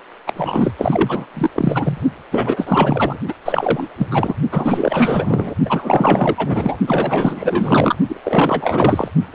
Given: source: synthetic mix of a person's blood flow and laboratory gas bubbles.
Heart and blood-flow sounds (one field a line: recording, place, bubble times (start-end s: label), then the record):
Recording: Doppler ultrasound of blood flow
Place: precordium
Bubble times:
0.27-0.33 s: bubbles
0.36-0.74 s: bubbles
0.77-1.27 s: bubbles
1.33-1.50 s: bubbles
1.55-1.98 s: bubbles
2.31-3.18 s: bubbles
3.27-3.34 s: bubbles
3.45-3.88 s: bubbles
3.97-4.35 s: bubbles
4.51-5.55 s: bubbles
5.65-6.78 s: bubbles
6.87-7.95 s: bubbles
8.08-9.09 s: bubbles
9.33-9.35 s: bubbles
From the record:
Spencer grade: 4 (maximum detectable bubble signal sounding continuously throughout systole and diastole of every cardiac period, and overriding the amplitude of the normal cardiac signals)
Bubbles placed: only in the low amplitude regions of the cardiac cycle